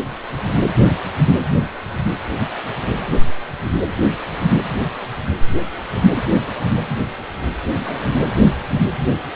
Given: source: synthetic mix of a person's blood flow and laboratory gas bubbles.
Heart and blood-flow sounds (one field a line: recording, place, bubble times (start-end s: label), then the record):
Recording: Doppler ultrasound of blood flow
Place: precordium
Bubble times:
7.73-8.22 s: bubbles
From the record:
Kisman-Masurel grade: 221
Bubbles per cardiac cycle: several, 3 to 8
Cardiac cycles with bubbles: 10 to 50%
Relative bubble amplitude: barely perceptible (0.100 to 0.250)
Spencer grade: 2 (many but less than half of the cardiac periods contain bubble signals, singularly or in groups)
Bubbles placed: anywhere in the cardiac cycle